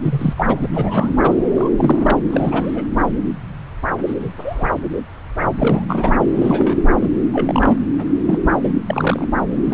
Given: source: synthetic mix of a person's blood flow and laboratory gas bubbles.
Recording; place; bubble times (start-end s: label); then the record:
Doppler ultrasound of blood flow; subclavian vein
0.01-0.67 s: bubbles
0.76-1.15 s: bubbles
1.21-1.34 s: bubbles
1.53-1.70 s: bubbles
1.78-2.17 s: bubbles
2.30-2.84 s: bubbles
4.06-4.14 s: bubbles
4.20-4.33 s: bubbles
4.37-4.69 s: bubbles
5.58-6.14 s: bubbles
6.32-6.76 s: bubbles
7.00-7.12 s: bubbles
7.32-7.78 s: bubbles
7.98-8.05 s: bubbles
8.27-8.39 s: bubbles
8.62-8.77 s: bubbles
8.86-9.28 s: bubbles
9.65-9.74 s: bubbles
From the record:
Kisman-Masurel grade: 232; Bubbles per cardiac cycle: several, 3 to 8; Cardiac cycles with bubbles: 50 to 99%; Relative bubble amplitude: moderate (0.250 to 0.450); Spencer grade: 3 (all of the cardiac periods contain showers or single bubble signals, but not dominating or overriding the cardiac motion signals); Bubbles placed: anywhere in the cardiac cycle